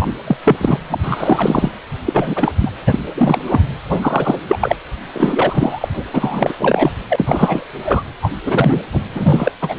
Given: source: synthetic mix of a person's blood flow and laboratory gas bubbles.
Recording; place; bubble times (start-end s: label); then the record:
Doppler ultrasound of blood flow; precordium
0.00-0.13 s: bubbles
0.26-0.37 s: bubbles
0.43-0.80 s: bubbles
0.90-1.72 s: bubbles
2.06-2.52 s: bubbles
2.60-2.71 s: bubbles
2.86-2.99 s: bubbles
3.17-3.42 s: bubbles
3.46-3.60 s: bubbles
3.89-4.40 s: bubbles
4.48-4.76 s: bubbles
5.14-5.88 s: bubbles
5.93-6.04 s: bubbles
6.12-6.53 s: bubbles
6.59-6.92 s: bubbles
7.09-7.65 s: bubbles
7.84-8.03 s: bubbles
8.21-8.30 s: bubbles
8.45-8.83 s: bubbles
8.92-9.07 s: bubbles
9.15-9.52 s: bubbles
9.61-9.77 s: bubbles
From the record:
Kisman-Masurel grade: 343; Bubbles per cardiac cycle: rolling drumbeat, 9 or more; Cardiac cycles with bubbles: 100%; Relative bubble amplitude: loud (0.450 to 0.775); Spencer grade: 3 (all of the cardiac periods contain showers or single bubble signals, but not dominating or overriding the cardiac motion signals); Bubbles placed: anywhere in the cardiac cycle